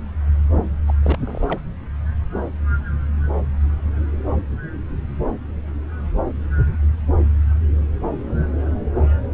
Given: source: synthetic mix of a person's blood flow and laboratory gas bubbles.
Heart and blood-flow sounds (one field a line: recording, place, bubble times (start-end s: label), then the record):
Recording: Doppler ultrasound of blood flow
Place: subclavian vein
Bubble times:
0.87-0.93 s: bubbles
1.02-1.18 s: bubbles
1.23-1.59 s: bubbles
From the record:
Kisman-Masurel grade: 211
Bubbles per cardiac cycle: several, 3 to 8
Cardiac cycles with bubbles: 1 to 10%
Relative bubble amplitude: barely perceptible (0.100 to 0.250)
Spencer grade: 1 (occasional bubble signal discernible with the cardiac motion signal, with majority of cardiac periods free of bubbles)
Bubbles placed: anywhere in the cardiac cycle